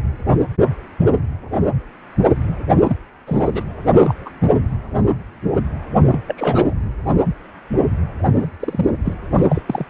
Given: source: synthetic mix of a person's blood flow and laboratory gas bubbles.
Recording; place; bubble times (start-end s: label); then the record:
Doppler ultrasound of blood flow; precordium
2.83-2.96 s: bubbles
3.27-3.63 s: bubbles
4.00-4.14 s: bubbles
4.25-4.29 s: bubbles
6.03-6.18 s: bubbles
6.26-6.75 s: bubbles
8.31-8.48 s: bubbles
8.60-8.85 s: bubbles
9.05-9.14 s: bubbles
9.37-9.45 s: bubbles
9.49-9.62 s: bubbles
9.66-9.86 s: bubbles
From the record:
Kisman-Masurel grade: 232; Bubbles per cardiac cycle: several, 3 to 8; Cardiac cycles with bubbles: 50 to 99%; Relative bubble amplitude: moderate (0.250 to 0.450); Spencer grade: 3 (all of the cardiac periods contain showers or single bubble signals, but not dominating or overriding the cardiac motion signals); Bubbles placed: anywhere in the cardiac cycle